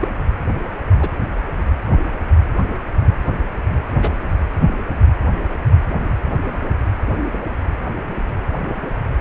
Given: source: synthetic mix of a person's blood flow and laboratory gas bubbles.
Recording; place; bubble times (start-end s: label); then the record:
Doppler ultrasound of blood flow; precordium
0.00-0.08 s: bubbles
1.00-1.10 s: bubbles
4.01-4.12 s: bubbles
From the record:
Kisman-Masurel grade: 122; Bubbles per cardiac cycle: 1 to 2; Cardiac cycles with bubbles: 10 to 50%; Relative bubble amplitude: moderate (0.250 to 0.450); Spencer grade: 2 (many but less than half of the cardiac periods contain bubble signals, singularly or in groups); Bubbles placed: anywhere in the cardiac cycle